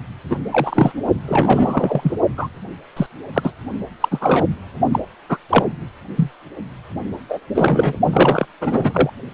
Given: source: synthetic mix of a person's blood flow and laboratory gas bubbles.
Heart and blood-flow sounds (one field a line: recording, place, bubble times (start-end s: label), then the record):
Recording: Doppler ultrasound of blood flow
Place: precordium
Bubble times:
0.29-0.37 s: bubbles
0.51-0.92 s: bubbles
1.26-2.12 s: bubbles
2.37-2.48 s: bubbles
2.96-3.06 s: bubbles
3.33-3.52 s: bubbles
4.00-4.46 s: bubbles
4.91-5.00 s: bubbles
5.29-5.38 s: bubbles
5.50-5.65 s: bubbles
6.16-6.31 s: bubbles
7.29-7.39 s: bubbles
7.54-7.96 s: bubbles
8.12-8.46 s: bubbles
8.61-9.10 s: bubbles
From the record:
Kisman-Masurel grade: 243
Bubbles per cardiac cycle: several, 3 to 8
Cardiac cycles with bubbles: 100%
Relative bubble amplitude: loud (0.450 to 0.775)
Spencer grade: 3 (all of the cardiac periods contain showers or single bubble signals, but not dominating or overriding the cardiac motion signals)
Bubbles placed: only in the low amplitude regions of the cardiac cycle